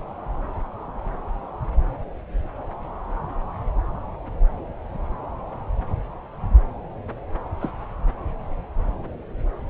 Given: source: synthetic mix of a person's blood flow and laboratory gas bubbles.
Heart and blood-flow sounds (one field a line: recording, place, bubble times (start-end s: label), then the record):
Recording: Doppler ultrasound of blood flow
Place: subclavian vein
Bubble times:
7.60-7.72 s: bubbles
From the record:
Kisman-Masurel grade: 111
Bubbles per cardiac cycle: 1 to 2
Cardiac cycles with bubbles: 1 to 10%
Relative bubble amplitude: barely perceptible (0.100 to 0.250)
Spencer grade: 1 (occasional bubble signal discernible with the cardiac motion signal, with majority of cardiac periods free of bubbles)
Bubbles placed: anywhere in the cardiac cycle